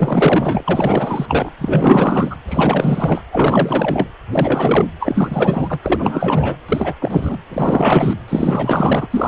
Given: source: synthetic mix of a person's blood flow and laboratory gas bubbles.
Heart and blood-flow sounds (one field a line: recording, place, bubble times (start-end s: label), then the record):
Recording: Doppler ultrasound of blood flow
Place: precordium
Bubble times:
0.00-0.64 s: bubbles
0.67-1.51 s: bubbles
1.58-2.36 s: bubbles
2.48-3.22 s: bubbles
3.32-4.08 s: bubbles
4.28-4.86 s: bubbles
5.00-5.79 s: bubbles
5.83-6.57 s: bubbles
6.68-6.93 s: bubbles
7.01-7.39 s: bubbles
7.49-8.13 s: bubbles
8.28-9.07 s: bubbles
9.11-9.28 s: bubbles
From the record:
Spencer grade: 4 (maximum detectable bubble signal sounding continuously throughout systole and diastole of every cardiac period, and overriding the amplitude of the normal cardiac signals)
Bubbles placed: anywhere in the cardiac cycle